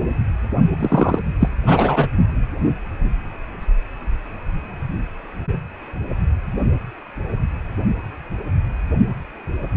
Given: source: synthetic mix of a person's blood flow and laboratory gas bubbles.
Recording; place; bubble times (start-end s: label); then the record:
Doppler ultrasound of blood flow; precordium
0.79-1.19 s: bubbles
1.40-1.48 s: bubbles
1.66-2.07 s: bubbles
From the record:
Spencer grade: 1 (occasional bubble signal discernible with the cardiac motion signal, with majority of cardiac periods free of bubbles); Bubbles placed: only in the low amplitude regions of the cardiac cycle